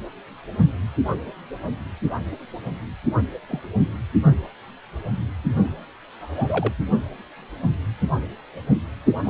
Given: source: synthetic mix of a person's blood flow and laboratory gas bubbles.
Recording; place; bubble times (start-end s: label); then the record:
Doppler ultrasound of blood flow; precordium
3.48-3.60 s: bubbles
6.21-6.72 s: bubbles
7.08-7.10 s: bubbles
9.24-9.30 s: bubbles
From the record:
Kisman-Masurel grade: 121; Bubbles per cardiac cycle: 1 to 2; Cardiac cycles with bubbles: 10 to 50%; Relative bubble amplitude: barely perceptible (0.100 to 0.250); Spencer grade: 2 (many but less than half of the cardiac periods contain bubble signals, singularly or in groups); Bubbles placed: anywhere in the cardiac cycle